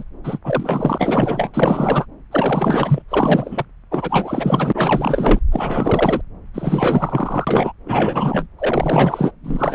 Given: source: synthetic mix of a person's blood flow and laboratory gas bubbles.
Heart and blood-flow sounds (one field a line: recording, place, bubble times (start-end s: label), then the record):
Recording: Doppler ultrasound of blood flow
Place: subclavian vein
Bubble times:
0.00-0.04 s: bubbles
0.24-0.39 s: bubbles
0.44-1.51 s: bubbles
1.54-2.06 s: bubbles
2.31-3.02 s: bubbles
3.08-3.65 s: bubbles
3.91-5.39 s: bubbles
5.51-6.21 s: bubbles
6.54-7.72 s: bubbles
7.85-8.47 s: bubbles
8.58-9.31 s: bubbles
9.43-9.74 s: bubbles
From the record:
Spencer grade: 4 (maximum detectable bubble signal sounding continuously throughout systole and diastole of every cardiac period, and overriding the amplitude of the normal cardiac signals)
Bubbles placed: anywhere in the cardiac cycle